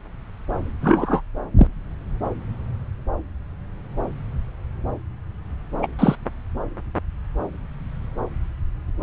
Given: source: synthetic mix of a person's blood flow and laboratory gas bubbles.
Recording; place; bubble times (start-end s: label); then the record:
Doppler ultrasound of blood flow; subclavian vein
0.81-1.22 s: bubbles
1.58-1.67 s: bubbles
5.82-5.87 s: bubbles
5.98-6.15 s: bubbles
From the record:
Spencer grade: 2 (many but less than half of the cardiac periods contain bubble signals, singularly or in groups); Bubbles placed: anywhere in the cardiac cycle